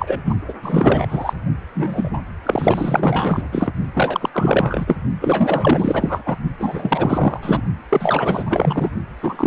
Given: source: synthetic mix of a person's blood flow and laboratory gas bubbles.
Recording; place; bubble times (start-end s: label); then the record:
Doppler ultrasound of blood flow; precordium
0.00-0.20 s: bubbles
0.24-0.35 s: bubbles
0.48-0.53 s: bubbles
0.62-1.33 s: bubbles
1.74-2.11 s: bubbles
2.13-2.17 s: bubbles
2.43-3.48 s: bubbles
3.51-3.73 s: bubbles
3.94-4.29 s: bubbles
4.33-4.96 s: bubbles
5.21-6.22 s: bubbles
6.25-6.36 s: bubbles
6.58-7.62 s: bubbles
7.90-8.90 s: bubbles
9.19-9.47 s: bubbles
From the record:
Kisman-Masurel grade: 444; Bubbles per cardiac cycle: continuous sound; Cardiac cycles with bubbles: 100%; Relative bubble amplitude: maximal (0.775 to 0.999); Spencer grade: 4 (maximum detectable bubble signal sounding continuously throughout systole and diastole of every cardiac period, and overriding the amplitude of the normal cardiac signals); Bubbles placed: only in the low amplitude regions of the cardiac cycle